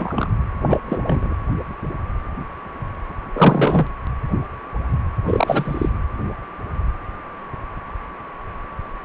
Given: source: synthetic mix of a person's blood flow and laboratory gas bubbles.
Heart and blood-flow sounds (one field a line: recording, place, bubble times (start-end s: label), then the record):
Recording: Doppler ultrasound of blood flow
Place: precordium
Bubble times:
0.00-0.29 s: bubbles
0.68-0.79 s: bubbles
0.86-1.34 s: bubbles
3.33-3.87 s: bubbles
5.26-5.89 s: bubbles
From the record:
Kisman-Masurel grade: 223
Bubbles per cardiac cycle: several, 3 to 8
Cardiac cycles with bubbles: 10 to 50%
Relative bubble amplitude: loud (0.450 to 0.775)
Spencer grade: 2 (many but less than half of the cardiac periods contain bubble signals, singularly or in groups)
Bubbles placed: anywhere in the cardiac cycle